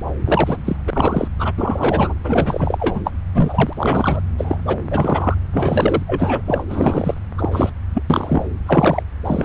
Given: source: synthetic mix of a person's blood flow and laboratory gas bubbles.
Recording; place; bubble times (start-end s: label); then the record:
Doppler ultrasound of blood flow; subclavian vein
0.25-0.61 s: bubbles
0.64-0.77 s: bubbles
0.85-0.90 s: bubbles
0.93-1.28 s: bubbles
1.38-1.52 s: bubbles
1.57-2.13 s: bubbles
2.23-3.11 s: bubbles
3.33-3.73 s: bubbles
3.77-4.21 s: bubbles
4.38-4.57 s: bubbles
4.67-4.78 s: bubbles
4.91-5.35 s: bubbles
5.52-6.03 s: bubbles
6.07-6.42 s: bubbles
6.47-6.64 s: bubbles
6.69-7.14 s: bubbles
7.38-7.70 s: bubbles
7.93-8.02 s: bubbles
8.10-8.47 s: bubbles
8.65-9.02 s: bubbles
9.24-9.45 s: bubbles
From the record:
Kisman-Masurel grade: 243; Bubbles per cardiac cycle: several, 3 to 8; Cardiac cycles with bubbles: 100%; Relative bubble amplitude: loud (0.450 to 0.775); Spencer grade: 3 (all of the cardiac periods contain showers or single bubble signals, but not dominating or overriding the cardiac motion signals); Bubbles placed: anywhere in the cardiac cycle